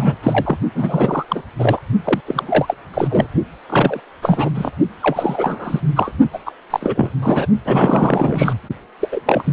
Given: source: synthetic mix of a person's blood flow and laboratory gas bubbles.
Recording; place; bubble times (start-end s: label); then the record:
Doppler ultrasound of blood flow; precordium
0.00-0.15 s: bubbles
0.23-0.57 s: bubbles
0.75-1.25 s: bubbles
1.28-1.43 s: bubbles
1.58-1.79 s: bubbles
2.04-2.21 s: bubbles
2.26-2.75 s: bubbles
2.94-3.27 s: bubbles
3.69-4.00 s: bubbles
4.22-4.50 s: bubbles
4.54-4.70 s: bubbles
5.02-5.80 s: bubbles
5.96-6.12 s: bubbles
6.33-6.39 s: bubbles
6.46-6.52 s: bubbles
6.70-7.09 s: bubbles
7.22-7.46 s: bubbles
7.65-8.54 s: bubbles
8.99-9.08 s: bubbles
9.11-9.21 s: bubbles
9.25-9.53 s: bubbles
From the record:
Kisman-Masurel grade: 343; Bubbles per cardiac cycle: rolling drumbeat, 9 or more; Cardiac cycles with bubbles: 100%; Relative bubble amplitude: loud (0.450 to 0.775); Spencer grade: 3 (all of the cardiac periods contain showers or single bubble signals, but not dominating or overriding the cardiac motion signals); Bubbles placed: only in the low amplitude regions of the cardiac cycle